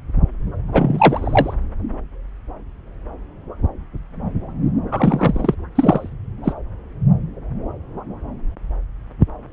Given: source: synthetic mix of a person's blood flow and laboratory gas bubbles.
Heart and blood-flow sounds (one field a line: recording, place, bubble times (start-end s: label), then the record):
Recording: Doppler ultrasound of blood flow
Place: subclavian vein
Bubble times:
0.71-1.54 s: bubbles
4.91-5.54 s: bubbles
5.75-6.09 s: bubbles
6.43-6.53 s: bubbles
From the record:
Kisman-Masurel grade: 223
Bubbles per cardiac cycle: several, 3 to 8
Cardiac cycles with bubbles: 10 to 50%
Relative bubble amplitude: loud (0.450 to 0.775)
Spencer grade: 2 (many but less than half of the cardiac periods contain bubble signals, singularly or in groups)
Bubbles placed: anywhere in the cardiac cycle